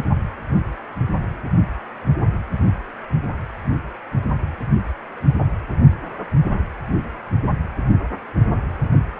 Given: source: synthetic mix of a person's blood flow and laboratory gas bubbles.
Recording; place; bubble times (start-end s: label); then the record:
Doppler ultrasound of blood flow; precordium
no bubbles
From the record:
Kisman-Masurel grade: 000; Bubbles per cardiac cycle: 0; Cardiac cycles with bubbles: 0%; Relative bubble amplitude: no bubbles discernible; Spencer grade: 0 (complete lack of bubble signals)